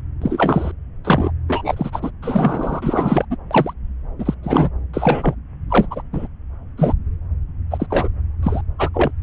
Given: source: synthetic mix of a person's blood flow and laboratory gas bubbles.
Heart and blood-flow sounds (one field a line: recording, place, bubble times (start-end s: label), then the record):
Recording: Doppler ultrasound of blood flow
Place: subclavian vein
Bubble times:
0.22-0.71 s: bubbles
1.04-1.31 s: bubbles
1.48-2.10 s: bubbles
2.22-3.25 s: bubbles
3.30-3.36 s: bubbles
3.50-3.73 s: bubbles
4.18-4.34 s: bubbles
4.42-4.69 s: bubbles
4.93-5.34 s: bubbles
5.70-5.86 s: bubbles
5.91-6.02 s: bubbles
6.12-6.27 s: bubbles
6.78-6.93 s: bubbles
7.71-7.86 s: bubbles
7.90-8.08 s: bubbles
8.43-8.61 s: bubbles
8.79-8.89 s: bubbles
8.94-9.11 s: bubbles
From the record:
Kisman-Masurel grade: 243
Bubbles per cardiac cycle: several, 3 to 8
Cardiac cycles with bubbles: 100%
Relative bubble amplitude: loud (0.450 to 0.775)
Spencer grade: 3 (all of the cardiac periods contain showers or single bubble signals, but not dominating or overriding the cardiac motion signals)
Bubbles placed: anywhere in the cardiac cycle